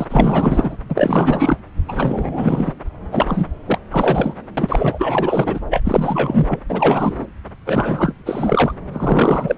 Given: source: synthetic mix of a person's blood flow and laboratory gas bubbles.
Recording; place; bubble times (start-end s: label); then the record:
Doppler ultrasound of blood flow; subclavian vein
0.00-0.05 s: bubbles
0.09-0.77 s: bubbles
0.89-1.57 s: bubbles
1.88-2.73 s: bubbles
3.12-3.50 s: bubbles
3.66-3.79 s: bubbles
3.92-4.34 s: bubbles
4.57-5.59 s: bubbles
5.70-5.81 s: bubbles
5.84-6.59 s: bubbles
6.68-7.27 s: bubbles
7.66-8.13 s: bubbles
8.26-8.74 s: bubbles
8.93-9.55 s: bubbles
From the record:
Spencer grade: 4 (maximum detectable bubble signal sounding continuously throughout systole and diastole of every cardiac period, and overriding the amplitude of the normal cardiac signals); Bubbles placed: anywhere in the cardiac cycle